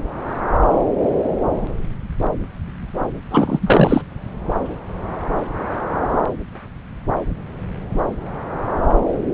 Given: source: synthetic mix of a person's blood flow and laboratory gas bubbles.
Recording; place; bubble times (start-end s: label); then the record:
Doppler ultrasound of blood flow; subclavian vein
3.31-4.04 s: bubbles
From the record:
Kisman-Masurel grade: 213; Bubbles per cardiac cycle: several, 3 to 8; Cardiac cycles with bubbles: 1 to 10%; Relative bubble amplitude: loud (0.450 to 0.775); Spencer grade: 1 (occasional bubble signal discernible with the cardiac motion signal, with majority of cardiac periods free of bubbles); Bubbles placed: anywhere in the cardiac cycle